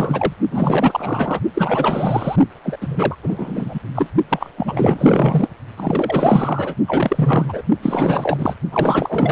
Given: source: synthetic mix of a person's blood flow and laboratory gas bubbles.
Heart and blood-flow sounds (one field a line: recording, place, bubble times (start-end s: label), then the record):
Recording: Doppler ultrasound of blood flow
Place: precordium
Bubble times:
0.00-0.32 s: bubbles
0.51-1.41 s: bubbles
1.54-2.36 s: bubbles
2.63-2.77 s: bubbles
2.81-3.16 s: bubbles
3.22-3.79 s: bubbles
3.95-4.09 s: bubbles
4.29-4.50 s: bubbles
4.57-5.50 s: bubbles
5.77-6.75 s: bubbles
6.88-7.62 s: bubbles
7.82-8.55 s: bubbles
8.71-9.32 s: bubbles
From the record:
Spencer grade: 4 (maximum detectable bubble signal sounding continuously throughout systole and diastole of every cardiac period, and overriding the amplitude of the normal cardiac signals)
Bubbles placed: only in the low amplitude regions of the cardiac cycle